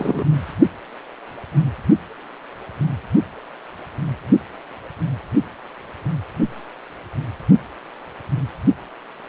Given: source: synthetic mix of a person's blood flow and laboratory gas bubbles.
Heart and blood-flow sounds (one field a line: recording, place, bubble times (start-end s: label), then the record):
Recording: Doppler ultrasound of blood flow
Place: precordium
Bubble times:
0.00-0.24 s: bubbles
From the record:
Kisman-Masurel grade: 213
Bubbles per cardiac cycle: several, 3 to 8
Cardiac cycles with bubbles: 1 to 10%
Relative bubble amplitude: loud (0.450 to 0.775)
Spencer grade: 1 (occasional bubble signal discernible with the cardiac motion signal, with majority of cardiac periods free of bubbles)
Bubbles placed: anywhere in the cardiac cycle